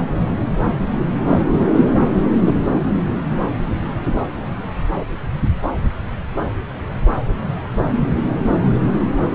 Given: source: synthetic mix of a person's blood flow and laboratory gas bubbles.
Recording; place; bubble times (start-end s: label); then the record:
Doppler ultrasound of blood flow; subclavian vein
1.30-1.43 s: bubbles
2.41-2.56 s: bubbles
From the record:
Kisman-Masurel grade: 122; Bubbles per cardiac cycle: 1 to 2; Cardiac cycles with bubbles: 10 to 50%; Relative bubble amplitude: moderate (0.250 to 0.450); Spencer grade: 2 (many but less than half of the cardiac periods contain bubble signals, singularly or in groups); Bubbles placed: anywhere in the cardiac cycle